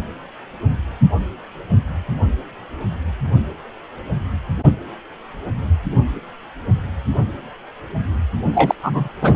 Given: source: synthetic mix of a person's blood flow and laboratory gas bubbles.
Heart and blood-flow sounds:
Doppler ultrasound of blood flow; precordium
8.54-8.75 s: bubbles
8.83-9.08 s: bubbles
9.21-9.36 s: bubbles
From the record:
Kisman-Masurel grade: 223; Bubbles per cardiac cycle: several, 3 to 8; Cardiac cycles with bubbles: 10 to 50%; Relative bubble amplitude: loud (0.450 to 0.775); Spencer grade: 2 (many but less than half of the cardiac periods contain bubble signals, singularly or in groups); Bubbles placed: only in the low amplitude regions of the cardiac cycle

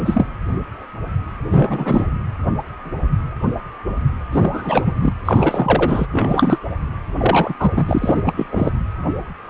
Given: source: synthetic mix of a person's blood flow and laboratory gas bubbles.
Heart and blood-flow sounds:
Doppler ultrasound of blood flow; precordium
0.00-0.27 s: bubbles
1.50-2.06 s: bubbles
4.31-4.93 s: bubbles
4.97-5.13 s: bubbles
5.25-6.06 s: bubbles
6.12-6.58 s: bubbles
7.19-7.54 s: bubbles
7.59-7.84 s: bubbles
7.88-8.22 s: bubbles
8.26-8.46 s: bubbles
8.52-8.72 s: bubbles
From the record:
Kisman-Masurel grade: 333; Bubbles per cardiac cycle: rolling drumbeat, 9 or more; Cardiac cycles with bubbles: 50 to 99%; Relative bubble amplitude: loud (0.450 to 0.775); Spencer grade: 3 (all of the cardiac periods contain showers or single bubble signals, but not dominating or overriding the cardiac motion signals); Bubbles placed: anywhere in the cardiac cycle

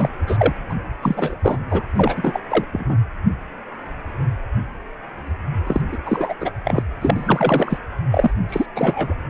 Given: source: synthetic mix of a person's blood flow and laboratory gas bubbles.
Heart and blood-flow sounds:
Doppler ultrasound of blood flow; precordium
0.00-0.09 s: bubbles
0.27-0.53 s: bubbles
0.70-0.76 s: bubbles
1.02-1.35 s: bubbles
1.44-1.58 s: bubbles
1.70-1.82 s: bubbles
1.94-2.41 s: bubbles
2.50-2.64 s: bubbles
2.71-2.98 s: bubbles
5.67-5.81 s: bubbles
5.92-5.97 s: bubbles
6.05-6.33 s: bubbles
6.40-6.51 s: bubbles
6.64-6.83 s: bubbles
7.01-7.79 s: bubbles
8.12-8.30 s: bubbles
8.48-8.66 s: bubbles
8.74-9.14 s: bubbles
From the record:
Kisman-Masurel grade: 333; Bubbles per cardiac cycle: rolling drumbeat, 9 or more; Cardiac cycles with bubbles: 50 to 99%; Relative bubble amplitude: loud (0.450 to 0.775); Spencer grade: 3 (all of the cardiac periods contain showers or single bubble signals, but not dominating or overriding the cardiac motion signals); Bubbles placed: anywhere in the cardiac cycle

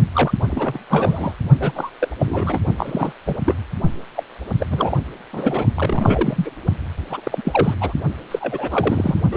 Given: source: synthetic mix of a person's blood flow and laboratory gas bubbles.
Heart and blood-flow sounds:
Doppler ultrasound of blood flow; precordium
0.13-0.33 s: bubbles
0.39-0.78 s: bubbles
0.90-1.33 s: bubbles
1.59-1.72 s: bubbles
1.75-1.90 s: bubbles
1.99-2.08 s: bubbles
2.19-2.59 s: bubbles
2.78-3.12 s: bubbles
3.26-3.36 s: bubbles
3.46-3.54 s: bubbles
4.14-4.23 s: bubbles
4.59-4.66 s: bubbles
4.69-4.97 s: bubbles
5.33-5.65 s: bubbles
5.75-6.50 s: bubbles
7.09-7.21 s: bubbles
7.23-7.75 s: bubbles
7.80-7.93 s: bubbles
8.31-9.21 s: bubbles
9.32-9.37 s: bubbles
From the record:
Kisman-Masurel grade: 332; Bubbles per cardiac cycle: rolling drumbeat, 9 or more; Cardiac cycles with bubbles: 50 to 99%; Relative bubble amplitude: moderate (0.250 to 0.450); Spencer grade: 3 (all of the cardiac periods contain showers or single bubble signals, but not dominating or overriding the cardiac motion signals); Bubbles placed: only in the low amplitude regions of the cardiac cycle

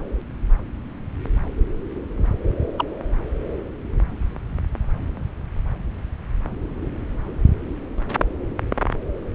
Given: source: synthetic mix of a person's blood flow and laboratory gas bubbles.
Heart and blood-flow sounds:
Doppler ultrasound of blood flow; subclavian vein
2.77-2.88 s: bubbles
From the record:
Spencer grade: 1 (occasional bubble signal discernible with the cardiac motion signal, with majority of cardiac periods free of bubbles); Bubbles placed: anywhere in the cardiac cycle

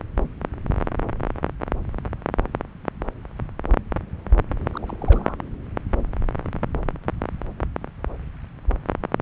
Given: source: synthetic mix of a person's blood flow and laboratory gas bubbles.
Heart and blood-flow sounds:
Doppler ultrasound of blood flow; subclavian vein
4.72-4.96 s: bubbles
5.01-5.35 s: bubbles
From the record:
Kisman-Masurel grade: 211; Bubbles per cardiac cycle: several, 3 to 8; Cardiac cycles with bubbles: 1 to 10%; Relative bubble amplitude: barely perceptible (0.100 to 0.250); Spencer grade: 1 (occasional bubble signal discernible with the cardiac motion signal, with majority of cardiac periods free of bubbles); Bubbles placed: anywhere in the cardiac cycle

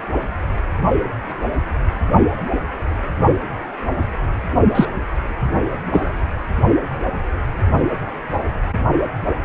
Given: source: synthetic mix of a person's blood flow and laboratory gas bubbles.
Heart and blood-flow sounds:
Doppler ultrasound of blood flow; precordium
4.75-4.86 s: bubbles
5.91-6.12 s: bubbles
From the record:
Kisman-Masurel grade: 113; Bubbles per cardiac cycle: 1 to 2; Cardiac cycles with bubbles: 1 to 10%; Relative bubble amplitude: loud (0.450 to 0.775); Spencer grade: 1 (occasional bubble signal discernible with the cardiac motion signal, with majority of cardiac periods free of bubbles); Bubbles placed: only in the low amplitude regions of the cardiac cycle

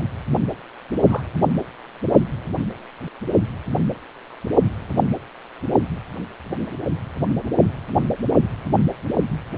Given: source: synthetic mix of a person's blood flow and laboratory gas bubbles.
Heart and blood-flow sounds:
Doppler ultrasound of blood flow; precordium
1.09-1.23 s: bubbles
From the record:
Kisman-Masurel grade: 111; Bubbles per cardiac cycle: 1 to 2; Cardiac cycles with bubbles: 1 to 10%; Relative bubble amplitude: barely perceptible (0.100 to 0.250); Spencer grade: 1 (occasional bubble signal discernible with the cardiac motion signal, with majority of cardiac periods free of bubbles); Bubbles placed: only in the low amplitude regions of the cardiac cycle

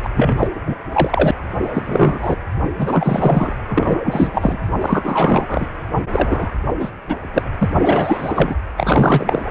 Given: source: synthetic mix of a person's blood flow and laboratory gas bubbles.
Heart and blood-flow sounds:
Doppler ultrasound of blood flow; precordium
0.03-0.10 s: bubbles
0.15-0.48 s: bubbles
0.66-0.74 s: bubbles
0.93-1.31 s: bubbles
1.63-1.70 s: bubbles
1.74-2.36 s: bubbles
2.79-3.54 s: bubbles
3.69-4.58 s: bubbles
4.81-5.67 s: bubbles
6.12-6.52 s: bubbles
6.79-6.91 s: bubbles
7.08-7.16 s: bubbles
7.33-7.43 s: bubbles
7.58-7.70 s: bubbles
7.82-8.55 s: bubbles
8.78-9.50 s: bubbles
From the record:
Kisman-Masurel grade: 343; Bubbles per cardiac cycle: rolling drumbeat, 9 or more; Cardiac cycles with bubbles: 100%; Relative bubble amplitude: loud (0.450 to 0.775); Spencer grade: 3 (all of the cardiac periods contain showers or single bubble signals, but not dominating or overriding the cardiac motion signals); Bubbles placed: anywhere in the cardiac cycle

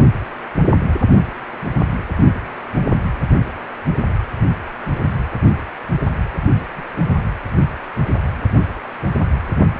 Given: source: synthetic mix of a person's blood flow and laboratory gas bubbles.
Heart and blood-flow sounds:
Doppler ultrasound of blood flow; precordium
6.76-6.83 s: bubbles
6.94-7.08 s: bubbles
From the record:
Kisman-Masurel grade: 111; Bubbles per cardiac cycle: 1 to 2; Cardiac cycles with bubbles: 1 to 10%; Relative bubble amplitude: barely perceptible (0.100 to 0.250); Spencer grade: 1 (occasional bubble signal discernible with the cardiac motion signal, with majority of cardiac periods free of bubbles); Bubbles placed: anywhere in the cardiac cycle

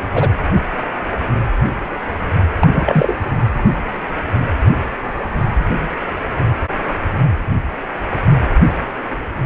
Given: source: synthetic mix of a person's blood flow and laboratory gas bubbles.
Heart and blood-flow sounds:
Doppler ultrasound of blood flow; precordium
0.14-0.28 s: bubbles
2.59-3.15 s: bubbles
From the record:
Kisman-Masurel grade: 223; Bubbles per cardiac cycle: several, 3 to 8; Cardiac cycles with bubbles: 10 to 50%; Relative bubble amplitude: loud (0.450 to 0.775); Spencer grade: 2 (many but less than half of the cardiac periods contain bubble signals, singularly or in groups); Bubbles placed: anywhere in the cardiac cycle

